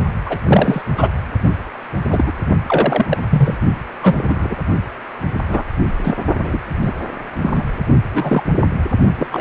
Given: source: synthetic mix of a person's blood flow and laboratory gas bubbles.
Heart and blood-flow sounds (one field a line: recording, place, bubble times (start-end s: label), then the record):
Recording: Doppler ultrasound of blood flow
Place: precordium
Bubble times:
0.26-0.39 s: bubbles
0.43-0.82 s: bubbles
0.97-1.09 s: bubbles
1.41-1.51 s: bubbles
2.12-2.32 s: bubbles
2.68-3.06 s: bubbles
3.08-3.18 s: bubbles
3.29-3.56 s: bubbles
4.03-4.57 s: bubbles
5.49-5.63 s: bubbles
6.03-6.15 s: bubbles
6.42-6.58 s: bubbles
6.82-6.93 s: bubbles
7.42-7.64 s: bubbles
8.13-8.43 s: bubbles
9.18-9.27 s: bubbles
9.32-9.41 s: bubbles
From the record:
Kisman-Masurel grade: 243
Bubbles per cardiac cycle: several, 3 to 8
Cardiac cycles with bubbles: 100%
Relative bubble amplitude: loud (0.450 to 0.775)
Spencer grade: 3 (all of the cardiac periods contain showers or single bubble signals, but not dominating or overriding the cardiac motion signals)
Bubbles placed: only in the low amplitude regions of the cardiac cycle